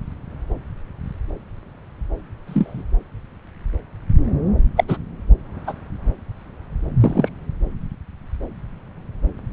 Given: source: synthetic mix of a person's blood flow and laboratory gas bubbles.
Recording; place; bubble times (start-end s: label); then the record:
Doppler ultrasound of blood flow; subclavian vein
2.47-2.84 s: bubbles
4.76-4.84 s: bubbles
4.88-4.97 s: bubbles
5.67-5.73 s: bubbles
7.00-7.29 s: bubbles
From the record:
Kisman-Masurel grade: 123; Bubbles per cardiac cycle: 1 to 2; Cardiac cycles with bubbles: 10 to 50%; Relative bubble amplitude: loud (0.450 to 0.775); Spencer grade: 2 (many but less than half of the cardiac periods contain bubble signals, singularly or in groups); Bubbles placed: anywhere in the cardiac cycle